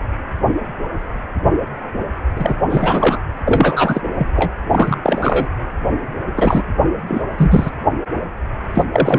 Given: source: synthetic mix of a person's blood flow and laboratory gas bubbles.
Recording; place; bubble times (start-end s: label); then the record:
Doppler ultrasound of blood flow; precordium
2.35-2.55 s: bubbles
2.69-3.19 s: bubbles
3.44-4.01 s: bubbles
4.15-4.27 s: bubbles
4.35-4.51 s: bubbles
4.71-4.96 s: bubbles
5.03-5.48 s: bubbles
6.36-6.63 s: bubbles
7.08-7.21 s: bubbles
7.38-7.70 s: bubbles
8.75-8.83 s: bubbles
8.92-9.19 s: bubbles
From the record:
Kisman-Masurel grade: 333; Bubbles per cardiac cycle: rolling drumbeat, 9 or more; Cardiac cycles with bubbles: 50 to 99%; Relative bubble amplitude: loud (0.450 to 0.775); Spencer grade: 3 (all of the cardiac periods contain showers or single bubble signals, but not dominating or overriding the cardiac motion signals); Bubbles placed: anywhere in the cardiac cycle